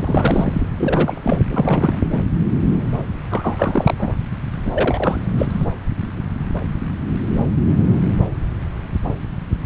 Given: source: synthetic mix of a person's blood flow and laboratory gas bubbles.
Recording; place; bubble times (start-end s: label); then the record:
Doppler ultrasound of blood flow; subclavian vein
0.00-0.69 s: bubbles
0.77-1.40 s: bubbles
1.49-2.22 s: bubbles
3.30-3.94 s: bubbles
3.98-4.14 s: bubbles
4.65-5.21 s: bubbles
5.37-5.67 s: bubbles
9.62-9.66 s: bubbles
From the record:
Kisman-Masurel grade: 332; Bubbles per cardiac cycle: rolling drumbeat, 9 or more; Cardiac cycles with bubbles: 50 to 99%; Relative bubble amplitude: moderate (0.250 to 0.450); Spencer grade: 3 (all of the cardiac periods contain showers or single bubble signals, but not dominating or overriding the cardiac motion signals); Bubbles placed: anywhere in the cardiac cycle